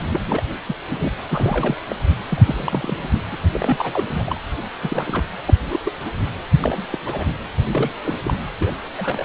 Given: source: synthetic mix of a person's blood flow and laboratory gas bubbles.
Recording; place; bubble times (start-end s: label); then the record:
Doppler ultrasound of blood flow; precordium
0.10-0.21 s: bubbles
0.26-0.43 s: bubbles
0.67-0.76 s: bubbles
0.90-1.11 s: bubbles
1.30-1.75 s: bubbles
1.90-1.95 s: bubbles
2.30-3.08 s: bubbles
3.11-3.20 s: bubbles
3.30-3.36 s: bubbles
3.51-4.08 s: bubbles
4.10-4.40 s: bubbles
4.82-5.25 s: bubbles
5.46-5.57 s: bubbles
5.71-5.79 s: bubbles
5.85-5.92 s: bubbles
6.04-6.11 s: bubbles
6.60-6.87 s: bubbles
6.92-6.98 s: bubbles
7.06-7.25 s: bubbles
7.67-7.91 s: bubbles
8.02-8.14 s: bubbles
8.24-8.33 s: bubbles
8.58-8.74 s: bubbles
8.98-9.25 s: bubbles
From the record:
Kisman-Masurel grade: 232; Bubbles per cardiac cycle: several, 3 to 8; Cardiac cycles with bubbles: 50 to 99%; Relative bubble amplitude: moderate (0.250 to 0.450); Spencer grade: 3 (all of the cardiac periods contain showers or single bubble signals, but not dominating or overriding the cardiac motion signals); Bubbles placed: anywhere in the cardiac cycle